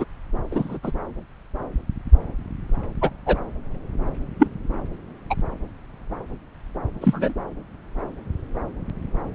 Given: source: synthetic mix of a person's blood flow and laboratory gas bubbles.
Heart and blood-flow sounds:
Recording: Doppler ultrasound of blood flow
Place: subclavian vein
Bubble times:
0.00-0.05 s: bubbles
0.51-0.78 s: bubbles
0.83-0.92 s: bubbles
3.01-3.10 s: bubbles
3.26-3.38 s: bubbles
4.39-4.47 s: bubbles
5.30-5.34 s: bubbles
7.00-7.33 s: bubbles
From the record:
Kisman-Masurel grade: 123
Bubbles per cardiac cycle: 1 to 2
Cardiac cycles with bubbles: 10 to 50%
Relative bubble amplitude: loud (0.450 to 0.775)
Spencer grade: 2 (many but less than half of the cardiac periods contain bubble signals, singularly or in groups)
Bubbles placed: anywhere in the cardiac cycle

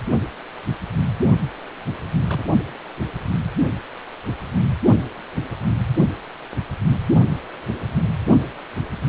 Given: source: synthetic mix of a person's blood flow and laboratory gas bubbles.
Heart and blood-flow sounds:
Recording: Doppler ultrasound of blood flow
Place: precordium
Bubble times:
2.27-2.44 s: bubbles
From the record:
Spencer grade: 2 (many but less than half of the cardiac periods contain bubble signals, singularly or in groups)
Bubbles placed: only in the low amplitude regions of the cardiac cycle

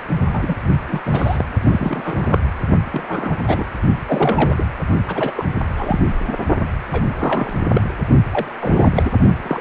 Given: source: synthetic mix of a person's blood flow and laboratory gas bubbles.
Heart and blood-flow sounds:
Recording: Doppler ultrasound of blood flow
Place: precordium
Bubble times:
0.33-0.55 s: bubbles
0.88-1.00 s: bubbles
1.05-1.45 s: bubbles
1.62-2.38 s: bubbles
2.92-3.36 s: bubbles
3.47-3.66 s: bubbles
4.07-4.66 s: bubbles
5.08-5.44 s: bubbles
5.77-6.00 s: bubbles
6.27-6.33 s: bubbles
6.91-7.07 s: bubbles
7.20-7.54 s: bubbles
7.73-7.82 s: bubbles
8.31-8.54 s: bubbles
8.60-9.10 s: bubbles
9.43-9.61 s: bubbles
From the record:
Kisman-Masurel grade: 242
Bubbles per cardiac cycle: several, 3 to 8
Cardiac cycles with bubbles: 100%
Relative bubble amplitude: moderate (0.250 to 0.450)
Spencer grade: 3 (all of the cardiac periods contain showers or single bubble signals, but not dominating or overriding the cardiac motion signals)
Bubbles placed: only in the low amplitude regions of the cardiac cycle

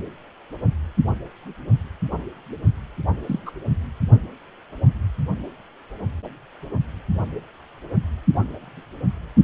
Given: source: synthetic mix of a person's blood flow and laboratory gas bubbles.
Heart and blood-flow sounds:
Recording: Doppler ultrasound of blood flow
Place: precordium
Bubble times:
3.28-3.39 s: bubbles
3.46-3.52 s: bubbles
From the record:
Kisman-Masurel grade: 121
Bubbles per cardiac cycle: 1 to 2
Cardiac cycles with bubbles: 10 to 50%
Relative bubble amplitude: barely perceptible (0.100 to 0.250)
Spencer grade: 2 (many but less than half of the cardiac periods contain bubble signals, singularly or in groups)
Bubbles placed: only in the low amplitude regions of the cardiac cycle

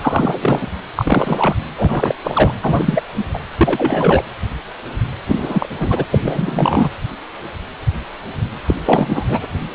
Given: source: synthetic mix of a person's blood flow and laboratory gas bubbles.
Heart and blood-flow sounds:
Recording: Doppler ultrasound of blood flow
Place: precordium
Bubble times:
0.00-0.68 s: bubbles
0.96-1.55 s: bubbles
1.77-2.15 s: bubbles
2.23-2.52 s: bubbles
2.61-3.02 s: bubbles
3.16-3.25 s: bubbles
3.33-3.38 s: bubbles
3.57-4.24 s: bubbles
5.28-5.69 s: bubbles
5.79-6.05 s: bubbles
6.11-6.90 s: bubbles
8.66-8.74 s: bubbles
8.81-9.39 s: bubbles
From the record:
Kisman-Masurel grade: 333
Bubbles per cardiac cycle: rolling drumbeat, 9 or more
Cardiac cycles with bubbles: 50 to 99%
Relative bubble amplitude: loud (0.450 to 0.775)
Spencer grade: 3 (all of the cardiac periods contain showers or single bubble signals, but not dominating or overriding the cardiac motion signals)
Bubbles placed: anywhere in the cardiac cycle

